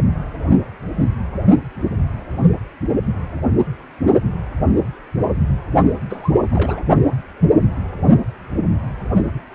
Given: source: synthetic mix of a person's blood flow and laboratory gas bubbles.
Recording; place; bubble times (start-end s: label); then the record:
Doppler ultrasound of blood flow; precordium
6.09-6.33 s: bubbles
6.51-6.83 s: bubbles
From the record:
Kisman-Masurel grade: 211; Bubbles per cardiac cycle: several, 3 to 8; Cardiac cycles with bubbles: 1 to 10%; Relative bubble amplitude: barely perceptible (0.100 to 0.250); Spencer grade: 1 (occasional bubble signal discernible with the cardiac motion signal, with majority of cardiac periods free of bubbles); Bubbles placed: only in the low amplitude regions of the cardiac cycle